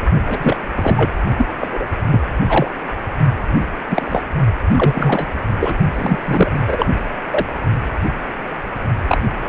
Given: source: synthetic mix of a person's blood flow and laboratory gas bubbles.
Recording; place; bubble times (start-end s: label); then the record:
Doppler ultrasound of blood flow; precordium
0.28-0.57 s: bubbles
0.75-1.11 s: bubbles
1.38-1.48 s: bubbles
1.60-1.85 s: bubbles
2.04-2.20 s: bubbles
2.48-2.68 s: bubbles
3.60-3.67 s: bubbles
3.89-4.22 s: bubbles
4.68-5.27 s: bubbles
5.59-5.74 s: bubbles
5.93-6.19 s: bubbles
6.25-6.86 s: bubbles
7.30-7.46 s: bubbles
9.08-9.20 s: bubbles
9.41-9.48 s: bubbles
From the record:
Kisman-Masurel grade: 233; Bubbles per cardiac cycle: several, 3 to 8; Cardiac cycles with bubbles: 50 to 99%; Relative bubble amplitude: loud (0.450 to 0.775); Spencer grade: 3 (all of the cardiac periods contain showers or single bubble signals, but not dominating or overriding the cardiac motion signals); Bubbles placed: only in the low amplitude regions of the cardiac cycle